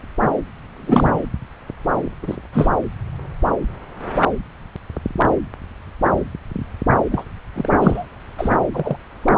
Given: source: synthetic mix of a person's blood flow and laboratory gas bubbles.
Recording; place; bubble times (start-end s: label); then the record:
Doppler ultrasound of blood flow; subclavian vein
0.76-1.20 s: bubbles
2.23-2.37 s: bubbles
2.52-2.68 s: bubbles
7.11-7.24 s: bubbles
7.54-7.69 s: bubbles
7.79-8.05 s: bubbles
8.38-8.56 s: bubbles
8.72-8.97 s: bubbles
9.23-9.32 s: bubbles
From the record:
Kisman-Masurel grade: 223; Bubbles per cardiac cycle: several, 3 to 8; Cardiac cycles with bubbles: 10 to 50%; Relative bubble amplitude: loud (0.450 to 0.775); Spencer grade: 2 (many but less than half of the cardiac periods contain bubble signals, singularly or in groups); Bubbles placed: anywhere in the cardiac cycle